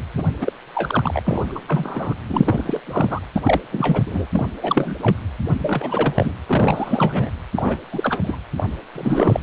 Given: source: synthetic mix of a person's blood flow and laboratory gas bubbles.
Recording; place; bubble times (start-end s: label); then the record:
Doppler ultrasound of blood flow; precordium
0.16-0.27 s: bubbles
0.41-0.53 s: bubbles
0.74-1.44 s: bubbles
1.48-1.59 s: bubbles
1.67-2.15 s: bubbles
2.27-2.80 s: bubbles
2.87-3.19 s: bubbles
3.35-3.60 s: bubbles
3.72-4.03 s: bubbles
4.07-4.26 s: bubbles
4.32-4.49 s: bubbles
4.62-4.96 s: bubbles
5.02-5.16 s: bubbles
5.59-6.14 s: bubbles
6.17-6.34 s: bubbles
6.46-7.30 s: bubbles
7.57-7.78 s: bubbles
7.91-8.19 s: bubbles
8.23-8.37 s: bubbles
8.56-8.64 s: bubbles
8.95-9.40 s: bubbles
From the record:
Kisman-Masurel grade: 342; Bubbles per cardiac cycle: rolling drumbeat, 9 or more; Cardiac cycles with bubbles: 100%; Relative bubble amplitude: moderate (0.250 to 0.450); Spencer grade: 3 (all of the cardiac periods contain showers or single bubble signals, but not dominating or overriding the cardiac motion signals); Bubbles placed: anywhere in the cardiac cycle